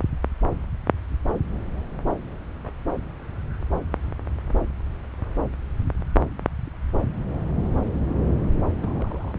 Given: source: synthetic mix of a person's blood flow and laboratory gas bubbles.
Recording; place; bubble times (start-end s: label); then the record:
Doppler ultrasound of blood flow; subclavian vein
8.80-9.32 s: bubbles
From the record:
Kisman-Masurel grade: 111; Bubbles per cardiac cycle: 1 to 2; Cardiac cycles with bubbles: 1 to 10%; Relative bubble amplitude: barely perceptible (0.100 to 0.250); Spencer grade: 1 (occasional bubble signal discernible with the cardiac motion signal, with majority of cardiac periods free of bubbles); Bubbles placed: anywhere in the cardiac cycle